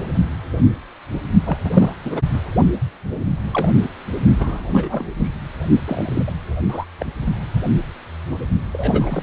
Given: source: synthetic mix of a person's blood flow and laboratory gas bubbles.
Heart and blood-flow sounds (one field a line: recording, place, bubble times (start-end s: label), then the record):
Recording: Doppler ultrasound of blood flow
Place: precordium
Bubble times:
1.45-1.57 s: bubbles
1.64-1.70 s: bubbles
1.73-1.94 s: bubbles
2.04-2.21 s: bubbles
2.32-2.41 s: bubbles
3.53-3.75 s: bubbles
4.37-4.66 s: bubbles
4.73-5.08 s: bubbles
5.20-5.32 s: bubbles
5.84-6.33 s: bubbles
6.69-6.86 s: bubbles
7.00-7.06 s: bubbles
8.71-9.23 s: bubbles
From the record:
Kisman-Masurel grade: 232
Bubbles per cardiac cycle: several, 3 to 8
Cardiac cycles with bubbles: 50 to 99%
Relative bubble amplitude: moderate (0.250 to 0.450)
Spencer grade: 3 (all of the cardiac periods contain showers or single bubble signals, but not dominating or overriding the cardiac motion signals)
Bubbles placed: only in the low amplitude regions of the cardiac cycle